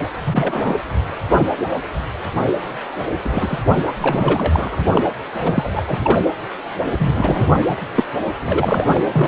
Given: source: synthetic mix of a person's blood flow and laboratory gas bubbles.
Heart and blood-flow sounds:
Doppler ultrasound of blood flow; precordium
0.03-0.09 s: bubbles
0.27-0.77 s: bubbles
3.24-3.62 s: bubbles
3.99-4.82 s: bubbles
4.92-5.09 s: bubbles
5.43-5.72 s: bubbles
5.75-5.83 s: bubbles
5.87-6.19 s: bubbles
6.99-7.57 s: bubbles
7.67-7.82 s: bubbles
7.95-8.07 s: bubbles
8.42-9.28 s: bubbles
From the record:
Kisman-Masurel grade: 232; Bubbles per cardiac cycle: several, 3 to 8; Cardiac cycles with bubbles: 50 to 99%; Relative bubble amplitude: moderate (0.250 to 0.450); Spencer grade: 3 (all of the cardiac periods contain showers or single bubble signals, but not dominating or overriding the cardiac motion signals); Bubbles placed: anywhere in the cardiac cycle

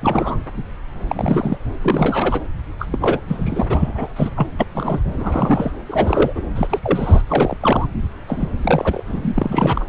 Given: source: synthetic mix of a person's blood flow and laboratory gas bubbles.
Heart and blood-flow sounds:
Doppler ultrasound of blood flow; subclavian vein
0.02-0.37 s: bubbles
1.07-1.58 s: bubbles
1.82-2.41 s: bubbles
2.79-3.20 s: bubbles
3.28-3.66 s: bubbles
3.69-4.31 s: bubbles
4.37-4.47 s: bubbles
4.59-4.66 s: bubbles
4.74-5.00 s: bubbles
5.11-5.72 s: bubbles
5.87-6.46 s: bubbles
6.55-6.80 s: bubbles
6.83-7.23 s: bubbles
7.28-7.57 s: bubbles
7.60-7.87 s: bubbles
8.27-8.49 s: bubbles
8.62-9.04 s: bubbles
9.06-9.20 s: bubbles
9.22-9.84 s: bubbles
From the record:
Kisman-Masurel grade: 332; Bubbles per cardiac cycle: rolling drumbeat, 9 or more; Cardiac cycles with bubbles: 50 to 99%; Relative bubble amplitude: moderate (0.250 to 0.450); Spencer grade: 3 (all of the cardiac periods contain showers or single bubble signals, but not dominating or overriding the cardiac motion signals); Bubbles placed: anywhere in the cardiac cycle

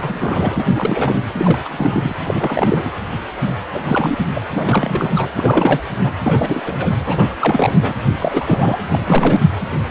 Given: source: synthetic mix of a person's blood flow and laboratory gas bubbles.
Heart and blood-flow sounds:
Doppler ultrasound of blood flow; precordium
0.01-0.67 s: bubbles
0.74-1.20 s: bubbles
1.38-1.59 s: bubbles
1.65-2.16 s: bubbles
2.28-2.91 s: bubbles
3.74-4.18 s: bubbles
4.34-4.41 s: bubbles
4.54-5.11 s: bubbles
5.14-5.29 s: bubbles
5.35-5.87 s: bubbles
6.03-6.12 s: bubbles
6.23-6.62 s: bubbles
6.66-6.90 s: bubbles
7.05-7.35 s: bubbles
7.39-7.75 s: bubbles
7.81-7.93 s: bubbles
8.19-8.81 s: bubbles
8.86-9.38 s: bubbles
From the record:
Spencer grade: 3 (all of the cardiac periods contain showers or single bubble signals, but not dominating or overriding the cardiac motion signals); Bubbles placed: anywhere in the cardiac cycle

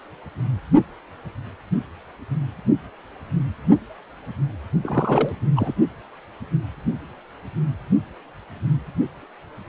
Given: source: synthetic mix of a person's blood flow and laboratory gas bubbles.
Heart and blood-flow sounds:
Doppler ultrasound of blood flow; precordium
4.82-5.32 s: bubbles
5.56-5.75 s: bubbles
From the record:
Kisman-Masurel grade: 212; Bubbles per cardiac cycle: several, 3 to 8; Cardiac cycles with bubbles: 1 to 10%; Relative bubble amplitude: moderate (0.250 to 0.450); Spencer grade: 1 (occasional bubble signal discernible with the cardiac motion signal, with majority of cardiac periods free of bubbles); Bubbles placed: only in the low amplitude regions of the cardiac cycle

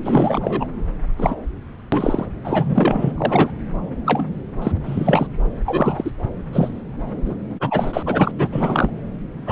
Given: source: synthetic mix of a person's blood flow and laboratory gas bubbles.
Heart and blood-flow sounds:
Doppler ultrasound of blood flow; subclavian vein
0.03-0.68 s: bubbles
1.18-1.35 s: bubbles
1.92-2.26 s: bubbles
2.44-3.13 s: bubbles
3.17-3.50 s: bubbles
4.05-4.25 s: bubbles
4.62-4.72 s: bubbles
4.86-5.27 s: bubbles
5.66-6.11 s: bubbles
6.53-6.69 s: bubbles
7.25-7.36 s: bubbles
7.60-8.03 s: bubbles
8.06-8.31 s: bubbles
8.37-8.89 s: bubbles
9.46-9.52 s: bubbles
From the record:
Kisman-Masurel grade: 232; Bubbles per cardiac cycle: several, 3 to 8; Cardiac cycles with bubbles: 50 to 99%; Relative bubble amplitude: moderate (0.250 to 0.450); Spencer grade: 3 (all of the cardiac periods contain showers or single bubble signals, but not dominating or overriding the cardiac motion signals); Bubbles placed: anywhere in the cardiac cycle

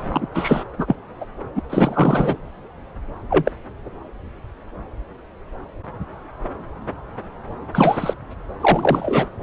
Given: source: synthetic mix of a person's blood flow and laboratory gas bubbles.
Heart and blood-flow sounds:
Doppler ultrasound of blood flow; subclavian vein
0.08-0.28 s: bubbles
0.34-0.64 s: bubbles
0.78-0.95 s: bubbles
1.20-1.25 s: bubbles
1.55-1.61 s: bubbles
1.69-2.37 s: bubbles
3.29-3.52 s: bubbles
7.73-8.13 s: bubbles
8.60-9.28 s: bubbles
From the record:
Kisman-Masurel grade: 223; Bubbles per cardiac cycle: several, 3 to 8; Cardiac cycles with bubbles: 10 to 50%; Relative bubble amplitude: loud (0.450 to 0.775); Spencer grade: 2 (many but less than half of the cardiac periods contain bubble signals, singularly or in groups); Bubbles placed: anywhere in the cardiac cycle

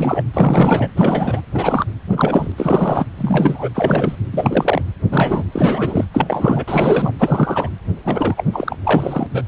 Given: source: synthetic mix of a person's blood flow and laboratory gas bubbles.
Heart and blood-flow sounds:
Doppler ultrasound of blood flow; precordium
0.00-0.23 s: bubbles
0.34-0.91 s: bubbles
0.96-1.41 s: bubbles
1.54-1.85 s: bubbles
2.09-2.52 s: bubbles
2.57-3.06 s: bubbles
3.17-3.69 s: bubbles
3.74-4.16 s: bubbles
4.32-4.82 s: bubbles
5.11-5.43 s: bubbles
5.52-6.05 s: bubbles
6.13-6.64 s: bubbles
6.67-7.12 s: bubbles
7.19-7.69 s: bubbles
8.04-8.44 s: bubbles
8.53-8.76 s: bubbles
8.84-9.27 s: bubbles
9.32-9.43 s: bubbles
From the record:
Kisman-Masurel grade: 343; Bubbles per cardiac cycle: rolling drumbeat, 9 or more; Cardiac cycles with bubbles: 100%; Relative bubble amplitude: loud (0.450 to 0.775); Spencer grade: 3 (all of the cardiac periods contain showers or single bubble signals, but not dominating or overriding the cardiac motion signals); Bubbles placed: anywhere in the cardiac cycle

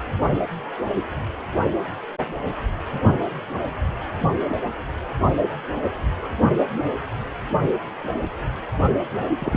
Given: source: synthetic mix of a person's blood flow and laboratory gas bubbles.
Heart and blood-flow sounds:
Doppler ultrasound of blood flow; precordium
9.40-9.56 s: bubbles
From the record:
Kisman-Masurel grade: 122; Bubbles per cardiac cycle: 1 to 2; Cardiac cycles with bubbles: 10 to 50%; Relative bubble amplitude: moderate (0.250 to 0.450); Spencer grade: 2 (many but less than half of the cardiac periods contain bubble signals, singularly or in groups); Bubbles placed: only in the low amplitude regions of the cardiac cycle

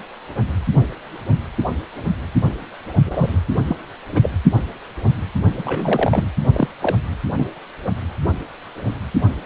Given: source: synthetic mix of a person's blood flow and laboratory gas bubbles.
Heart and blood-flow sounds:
Doppler ultrasound of blood flow; precordium
3.06-3.39 s: bubbles
3.68-3.75 s: bubbles
4.12-4.20 s: bubbles
4.22-4.29 s: bubbles
5.58-6.28 s: bubbles
6.53-6.68 s: bubbles
6.82-6.95 s: bubbles
7.37-7.46 s: bubbles
From the record:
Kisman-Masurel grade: 222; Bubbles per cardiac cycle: several, 3 to 8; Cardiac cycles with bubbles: 10 to 50%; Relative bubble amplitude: moderate (0.250 to 0.450); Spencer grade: 2 (many but less than half of the cardiac periods contain bubble signals, singularly or in groups); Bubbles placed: only in the low amplitude regions of the cardiac cycle

